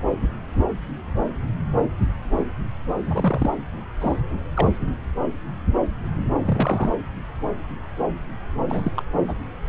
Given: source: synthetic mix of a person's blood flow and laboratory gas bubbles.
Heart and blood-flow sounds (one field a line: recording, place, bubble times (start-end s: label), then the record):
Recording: Doppler ultrasound of blood flow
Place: subclavian vein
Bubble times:
3.10-3.50 s: bubbles
4.00-4.20 s: bubbles
4.54-4.71 s: bubbles
6.45-6.93 s: bubbles
8.67-8.92 s: bubbles
8.96-9.02 s: bubbles
9.12-9.34 s: bubbles
From the record:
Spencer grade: 2 (many but less than half of the cardiac periods contain bubble signals, singularly or in groups)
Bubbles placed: anywhere in the cardiac cycle